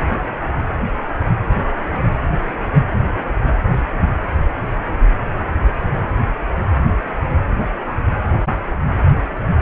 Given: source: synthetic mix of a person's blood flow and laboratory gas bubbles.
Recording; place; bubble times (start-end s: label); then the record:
Doppler ultrasound of blood flow; precordium
3.04-3.33 s: bubbles
6.75-6.79 s: bubbles
7.62-7.69 s: bubbles
From the record:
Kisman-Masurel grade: 121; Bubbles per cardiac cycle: 1 to 2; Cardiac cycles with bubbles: 10 to 50%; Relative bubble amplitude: barely perceptible (0.100 to 0.250); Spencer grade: 2 (many but less than half of the cardiac periods contain bubble signals, singularly or in groups); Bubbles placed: anywhere in the cardiac cycle